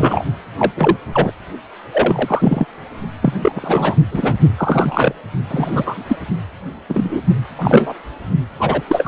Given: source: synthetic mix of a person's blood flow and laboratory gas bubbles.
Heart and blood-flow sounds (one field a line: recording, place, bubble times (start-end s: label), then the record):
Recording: Doppler ultrasound of blood flow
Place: precordium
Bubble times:
0.00-0.24 s: bubbles
0.59-0.72 s: bubbles
0.76-0.97 s: bubbles
1.13-1.32 s: bubbles
1.93-2.66 s: bubbles
3.21-3.33 s: bubbles
3.42-3.96 s: bubbles
4.11-4.34 s: bubbles
4.58-5.15 s: bubbles
5.50-6.04 s: bubbles
6.07-6.17 s: bubbles
6.89-7.21 s: bubbles
7.58-7.94 s: bubbles
8.58-8.82 s: bubbles
8.88-9.08 s: bubbles
From the record:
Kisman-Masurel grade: 243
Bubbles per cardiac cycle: several, 3 to 8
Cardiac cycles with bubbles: 100%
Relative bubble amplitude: loud (0.450 to 0.775)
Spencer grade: 3 (all of the cardiac periods contain showers or single bubble signals, but not dominating or overriding the cardiac motion signals)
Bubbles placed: only in the low amplitude regions of the cardiac cycle